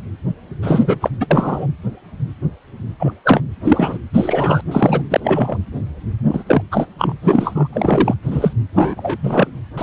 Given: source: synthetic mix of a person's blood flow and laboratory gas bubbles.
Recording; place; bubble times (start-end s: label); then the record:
Doppler ultrasound of blood flow; precordium
0.62-0.98 s: bubbles
1.01-1.10 s: bubbles
1.20-1.27 s: bubbles
1.31-1.67 s: bubbles
2.99-3.13 s: bubbles
3.24-3.42 s: bubbles
3.64-3.98 s: bubbles
4.13-4.62 s: bubbles
4.71-5.02 s: bubbles
5.10-5.21 s: bubbles
5.24-5.58 s: bubbles
6.27-6.44 s: bubbles
6.47-6.62 s: bubbles
6.72-6.87 s: bubbles
6.98-7.14 s: bubbles
7.22-7.68 s: bubbles
7.73-8.14 s: bubbles
8.23-8.53 s: bubbles
8.75-9.16 s: bubbles
9.23-9.47 s: bubbles
9.77-9.82 s: bubbles
From the record:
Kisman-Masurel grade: 233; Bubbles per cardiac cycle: several, 3 to 8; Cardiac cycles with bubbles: 50 to 99%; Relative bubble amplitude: loud (0.450 to 0.775); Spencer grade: 3 (all of the cardiac periods contain showers or single bubble signals, but not dominating or overriding the cardiac motion signals); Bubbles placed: anywhere in the cardiac cycle